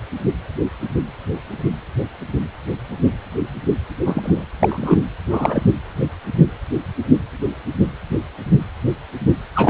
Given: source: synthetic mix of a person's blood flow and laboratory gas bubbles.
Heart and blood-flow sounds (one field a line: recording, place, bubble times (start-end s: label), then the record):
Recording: Doppler ultrasound of blood flow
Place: precordium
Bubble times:
4.05-4.46 s: bubbles
4.60-5.02 s: bubbles
5.27-5.62 s: bubbles
9.55-9.70 s: bubbles
From the record:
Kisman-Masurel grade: 223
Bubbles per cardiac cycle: several, 3 to 8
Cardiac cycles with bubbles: 10 to 50%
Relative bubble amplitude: loud (0.450 to 0.775)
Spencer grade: 2 (many but less than half of the cardiac periods contain bubble signals, singularly or in groups)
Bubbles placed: anywhere in the cardiac cycle